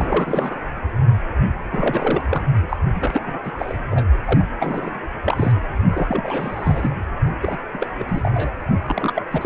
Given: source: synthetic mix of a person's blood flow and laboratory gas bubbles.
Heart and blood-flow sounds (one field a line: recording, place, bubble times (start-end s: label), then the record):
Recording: Doppler ultrasound of blood flow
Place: precordium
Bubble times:
0.00-0.60 s: bubbles
1.71-2.21 s: bubbles
2.29-2.43 s: bubbles
2.69-2.77 s: bubbles
2.95-3.22 s: bubbles
3.26-3.38 s: bubbles
3.44-3.52 s: bubbles
3.58-3.78 s: bubbles
3.91-4.04 s: bubbles
4.25-4.45 s: bubbles
4.59-4.91 s: bubbles
5.23-5.52 s: bubbles
5.92-6.89 s: bubbles
7.42-7.58 s: bubbles
7.73-7.88 s: bubbles
7.94-8.52 s: bubbles
8.83-9.23 s: bubbles
9.31-9.46 s: bubbles
From the record:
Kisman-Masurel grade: 332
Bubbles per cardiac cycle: rolling drumbeat, 9 or more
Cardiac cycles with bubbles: 50 to 99%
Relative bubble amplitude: moderate (0.250 to 0.450)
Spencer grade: 3 (all of the cardiac periods contain showers or single bubble signals, but not dominating or overriding the cardiac motion signals)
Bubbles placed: only in the low amplitude regions of the cardiac cycle